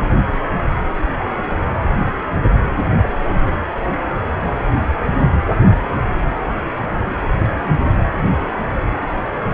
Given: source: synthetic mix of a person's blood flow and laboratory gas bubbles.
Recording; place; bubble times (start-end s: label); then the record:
Doppler ultrasound of blood flow; precordium
3.24-3.34 s: bubbles
3.42-3.50 s: bubbles
4.21-4.28 s: bubbles
From the record:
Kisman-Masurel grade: 221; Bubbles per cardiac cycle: several, 3 to 8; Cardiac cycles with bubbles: 10 to 50%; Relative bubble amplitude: barely perceptible (0.100 to 0.250); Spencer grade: 2 (many but less than half of the cardiac periods contain bubble signals, singularly or in groups); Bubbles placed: anywhere in the cardiac cycle